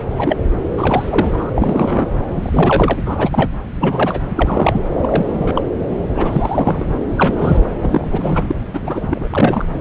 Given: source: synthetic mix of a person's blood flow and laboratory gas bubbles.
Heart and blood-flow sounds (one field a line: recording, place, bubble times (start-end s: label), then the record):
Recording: Doppler ultrasound of blood flow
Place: subclavian vein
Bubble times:
0.18-0.39 s: bubbles
0.77-1.49 s: bubbles
1.56-2.06 s: bubbles
2.28-2.94 s: bubbles
2.96-3.02 s: bubbles
3.05-3.50 s: bubbles
3.79-4.21 s: bubbles
4.29-4.81 s: bubbles
5.02-5.62 s: bubbles
6.14-6.86 s: bubbles
7.16-7.63 s: bubbles
7.82-8.06 s: bubbles
8.11-8.43 s: bubbles
8.47-8.55 s: bubbles
8.73-9.29 s: bubbles
9.32-9.65 s: bubbles
From the record:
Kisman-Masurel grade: 243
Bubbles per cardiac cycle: several, 3 to 8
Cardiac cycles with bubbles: 100%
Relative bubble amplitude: loud (0.450 to 0.775)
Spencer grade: 3 (all of the cardiac periods contain showers or single bubble signals, but not dominating or overriding the cardiac motion signals)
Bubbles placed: anywhere in the cardiac cycle